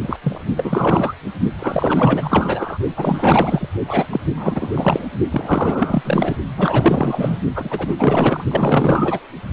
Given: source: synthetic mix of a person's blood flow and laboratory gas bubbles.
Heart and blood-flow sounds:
Doppler ultrasound of blood flow; precordium
0.02-0.17 s: bubbles
0.23-0.41 s: bubbles
0.57-1.13 s: bubbles
1.59-2.78 s: bubbles
2.96-3.67 s: bubbles
3.88-4.20 s: bubbles
4.37-5.08 s: bubbles
5.30-6.36 s: bubbles
6.57-7.38 s: bubbles
7.55-7.95 s: bubbles
7.99-8.44 s: bubbles
8.51-9.20 s: bubbles
From the record:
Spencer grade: 4 (maximum detectable bubble signal sounding continuously throughout systole and diastole of every cardiac period, and overriding the amplitude of the normal cardiac signals); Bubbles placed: only in the low amplitude regions of the cardiac cycle

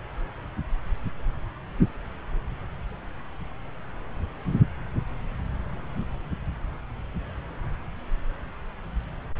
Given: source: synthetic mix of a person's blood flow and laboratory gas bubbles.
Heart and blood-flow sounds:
Doppler ultrasound of blood flow; subclavian vein
no bubbles
From the record:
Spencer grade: 0 (complete lack of bubble signals)

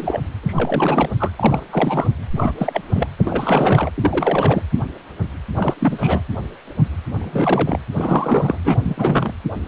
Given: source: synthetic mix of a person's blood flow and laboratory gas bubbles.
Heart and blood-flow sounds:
Doppler ultrasound of blood flow; precordium
0.00-0.19 s: bubbles
0.43-1.10 s: bubbles
1.20-1.31 s: bubbles
1.36-1.65 s: bubbles
1.71-2.10 s: bubbles
2.35-2.52 s: bubbles
2.57-2.81 s: bubbles
2.89-3.07 s: bubbles
3.18-3.90 s: bubbles
3.98-4.62 s: bubbles
5.56-5.74 s: bubbles
5.80-6.21 s: bubbles
7.19-7.78 s: bubbles
7.97-8.57 s: bubbles
8.64-8.76 s: bubbles
8.84-9.32 s: bubbles
From the record:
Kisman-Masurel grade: 332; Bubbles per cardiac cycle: rolling drumbeat, 9 or more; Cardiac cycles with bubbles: 50 to 99%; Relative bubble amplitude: moderate (0.250 to 0.450); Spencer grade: 3 (all of the cardiac periods contain showers or single bubble signals, but not dominating or overriding the cardiac motion signals); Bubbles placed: anywhere in the cardiac cycle

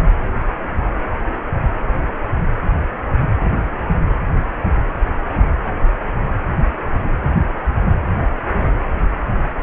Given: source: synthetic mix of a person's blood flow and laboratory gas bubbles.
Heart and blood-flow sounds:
Doppler ultrasound of blood flow; precordium
no bubbles
From the record:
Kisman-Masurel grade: 000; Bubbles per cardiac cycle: 0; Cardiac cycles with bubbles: 0%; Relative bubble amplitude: no bubbles discernible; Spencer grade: 0 (complete lack of bubble signals)

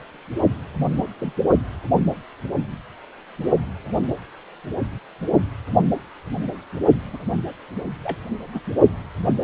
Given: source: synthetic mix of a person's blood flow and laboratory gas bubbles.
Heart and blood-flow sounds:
Doppler ultrasound of blood flow; precordium
1.20-1.33 s: bubbles
7.12-7.18 s: bubbles
8.03-8.18 s: bubbles
8.53-8.60 s: bubbles
From the record:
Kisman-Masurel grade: 121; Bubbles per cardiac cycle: 1 to 2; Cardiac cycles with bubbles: 10 to 50%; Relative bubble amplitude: barely perceptible (0.100 to 0.250); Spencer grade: 2 (many but less than half of the cardiac periods contain bubble signals, singularly or in groups); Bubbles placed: anywhere in the cardiac cycle

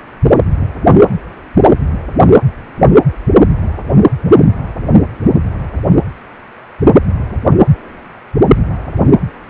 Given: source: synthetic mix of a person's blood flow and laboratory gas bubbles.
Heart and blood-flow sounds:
Doppler ultrasound of blood flow; precordium
no bubbles
From the record:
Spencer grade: 0 (complete lack of bubble signals)

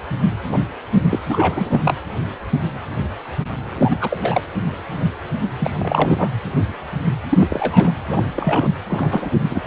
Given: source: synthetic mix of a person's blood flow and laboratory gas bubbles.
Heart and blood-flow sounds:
Doppler ultrasound of blood flow; precordium
0.48-0.58 s: bubbles
1.09-1.19 s: bubbles
1.28-1.97 s: bubbles
3.77-3.97 s: bubbles
4.00-4.41 s: bubbles
5.59-5.74 s: bubbles
5.79-6.30 s: bubbles
7.30-7.92 s: bubbles
8.11-8.23 s: bubbles
8.36-8.70 s: bubbles
8.89-9.30 s: bubbles
9.50-9.62 s: bubbles
From the record:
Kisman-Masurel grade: 222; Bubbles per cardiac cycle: several, 3 to 8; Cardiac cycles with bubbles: 10 to 50%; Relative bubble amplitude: moderate (0.250 to 0.450); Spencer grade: 2 (many but less than half of the cardiac periods contain bubble signals, singularly or in groups); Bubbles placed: anywhere in the cardiac cycle

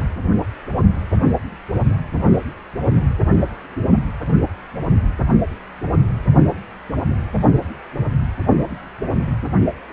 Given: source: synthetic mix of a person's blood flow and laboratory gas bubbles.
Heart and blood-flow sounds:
Doppler ultrasound of blood flow; precordium
no bubbles
From the record:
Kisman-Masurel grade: 000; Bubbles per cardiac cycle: 0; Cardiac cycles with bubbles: 0%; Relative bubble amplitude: no bubbles discernible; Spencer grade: 0 (complete lack of bubble signals)

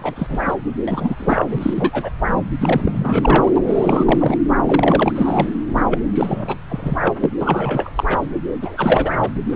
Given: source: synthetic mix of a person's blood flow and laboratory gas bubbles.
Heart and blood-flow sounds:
Doppler ultrasound of blood flow; subclavian vein
0.00-0.55 s: bubbles
0.88-1.45 s: bubbles
1.48-2.10 s: bubbles
2.60-3.52 s: bubbles
3.56-3.62 s: bubbles
3.67-4.38 s: bubbles
4.65-5.12 s: bubbles
5.15-5.48 s: bubbles
5.90-5.98 s: bubbles
6.13-6.57 s: bubbles
6.68-6.96 s: bubbles
7.00-7.14 s: bubbles
7.20-7.30 s: bubbles
7.40-7.89 s: bubbles
7.96-8.04 s: bubbles
8.09-8.17 s: bubbles
8.62-9.15 s: bubbles
9.22-9.30 s: bubbles
9.49-9.56 s: bubbles
From the record:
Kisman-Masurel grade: 343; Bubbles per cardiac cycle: rolling drumbeat, 9 or more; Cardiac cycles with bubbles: 100%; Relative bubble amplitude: loud (0.450 to 0.775); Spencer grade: 3 (all of the cardiac periods contain showers or single bubble signals, but not dominating or overriding the cardiac motion signals); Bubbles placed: anywhere in the cardiac cycle

